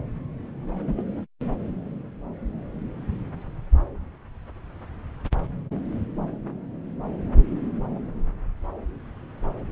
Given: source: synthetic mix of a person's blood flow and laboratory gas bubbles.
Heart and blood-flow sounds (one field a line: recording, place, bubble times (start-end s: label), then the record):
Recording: Doppler ultrasound of blood flow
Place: subclavian vein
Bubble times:
0.86-1.03 s: bubbles
From the record:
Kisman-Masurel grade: 113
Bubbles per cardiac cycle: 1 to 2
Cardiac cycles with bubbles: 1 to 10%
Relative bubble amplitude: loud (0.450 to 0.775)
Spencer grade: 1 (occasional bubble signal discernible with the cardiac motion signal, with majority of cardiac periods free of bubbles)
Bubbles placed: anywhere in the cardiac cycle